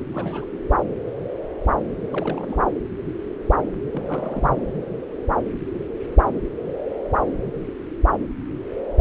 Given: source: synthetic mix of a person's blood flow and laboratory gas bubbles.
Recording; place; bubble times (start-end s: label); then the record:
Doppler ultrasound of blood flow; subclavian vein
0.11-0.45 s: bubbles
0.53-0.58 s: bubbles
2.05-2.64 s: bubbles
3.92-4.58 s: bubbles
From the record:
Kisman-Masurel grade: 221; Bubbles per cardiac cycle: several, 3 to 8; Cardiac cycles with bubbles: 10 to 50%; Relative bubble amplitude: barely perceptible (0.100 to 0.250); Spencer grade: 2 (many but less than half of the cardiac periods contain bubble signals, singularly or in groups); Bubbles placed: anywhere in the cardiac cycle